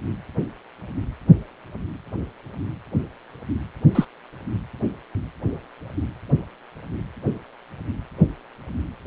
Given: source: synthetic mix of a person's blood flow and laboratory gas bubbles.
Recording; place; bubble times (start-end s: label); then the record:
Doppler ultrasound of blood flow; precordium
3.94-4.05 s: bubbles
From the record:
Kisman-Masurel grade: 113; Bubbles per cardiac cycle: 1 to 2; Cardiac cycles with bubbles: 1 to 10%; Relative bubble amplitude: loud (0.450 to 0.775); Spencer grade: 1 (occasional bubble signal discernible with the cardiac motion signal, with majority of cardiac periods free of bubbles); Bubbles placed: anywhere in the cardiac cycle